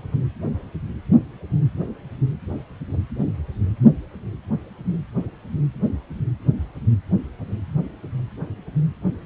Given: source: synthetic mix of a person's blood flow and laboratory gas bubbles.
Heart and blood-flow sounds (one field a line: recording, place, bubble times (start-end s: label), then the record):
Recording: Doppler ultrasound of blood flow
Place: precordium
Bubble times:
1.12-1.18 s: bubbles
From the record:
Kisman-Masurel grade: 122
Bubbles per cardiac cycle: 1 to 2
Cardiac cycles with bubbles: 10 to 50%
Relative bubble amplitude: moderate (0.250 to 0.450)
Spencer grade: 2 (many but less than half of the cardiac periods contain bubble signals, singularly or in groups)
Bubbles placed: anywhere in the cardiac cycle